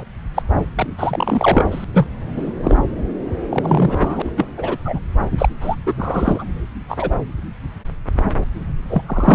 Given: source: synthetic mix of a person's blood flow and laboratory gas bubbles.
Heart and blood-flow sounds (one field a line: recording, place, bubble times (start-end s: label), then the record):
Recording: Doppler ultrasound of blood flow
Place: subclavian vein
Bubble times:
0.00-0.03 s: bubbles
0.34-0.43 s: bubbles
0.75-0.87 s: bubbles
0.98-1.84 s: bubbles
1.93-2.07 s: bubbles
2.36-2.52 s: bubbles
2.63-2.77 s: bubbles
3.49-4.32 s: bubbles
4.36-4.46 s: bubbles
4.57-4.78 s: bubbles
4.85-5.00 s: bubbles
5.38-5.49 s: bubbles
5.61-5.76 s: bubbles
5.86-5.95 s: bubbles
5.99-6.44 s: bubbles
6.88-7.10 s: bubbles
8.32-8.44 s: bubbles
8.89-9.02 s: bubbles
9.06-9.35 s: bubbles
From the record:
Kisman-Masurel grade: 233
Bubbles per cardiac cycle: several, 3 to 8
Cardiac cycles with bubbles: 50 to 99%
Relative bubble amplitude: loud (0.450 to 0.775)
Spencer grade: 3 (all of the cardiac periods contain showers or single bubble signals, but not dominating or overriding the cardiac motion signals)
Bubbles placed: anywhere in the cardiac cycle